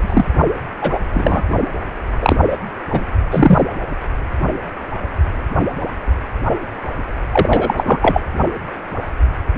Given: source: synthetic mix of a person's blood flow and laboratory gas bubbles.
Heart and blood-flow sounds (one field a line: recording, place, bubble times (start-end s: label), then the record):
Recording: Doppler ultrasound of blood flow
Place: precordium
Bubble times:
0.01-0.25 s: bubbles
0.81-0.99 s: bubbles
1.14-1.41 s: bubbles
2.21-2.37 s: bubbles
2.51-2.58 s: bubbles
2.93-3.05 s: bubbles
3.31-3.64 s: bubbles
7.31-7.75 s: bubbles
7.77-7.99 s: bubbles
8.02-8.21 s: bubbles
From the record:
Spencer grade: 3 (all of the cardiac periods contain showers or single bubble signals, but not dominating or overriding the cardiac motion signals)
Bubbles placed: anywhere in the cardiac cycle